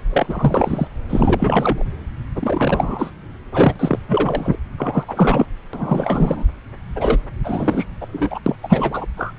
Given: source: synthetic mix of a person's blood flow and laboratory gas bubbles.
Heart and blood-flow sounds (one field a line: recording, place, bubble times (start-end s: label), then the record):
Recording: Doppler ultrasound of blood flow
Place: subclavian vein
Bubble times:
0.12-0.88 s: bubbles
1.08-1.83 s: bubbles
2.35-3.11 s: bubbles
3.54-3.99 s: bubbles
4.08-4.56 s: bubbles
4.78-5.05 s: bubbles
5.08-5.46 s: bubbles
5.73-6.45 s: bubbles
6.95-7.18 s: bubbles
7.43-7.86 s: bubbles
8.01-8.06 s: bubbles
8.12-8.39 s: bubbles
8.46-8.55 s: bubbles
8.63-9.05 s: bubbles
9.16-9.33 s: bubbles
From the record:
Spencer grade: 3 (all of the cardiac periods contain showers or single bubble signals, but not dominating or overriding the cardiac motion signals)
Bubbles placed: anywhere in the cardiac cycle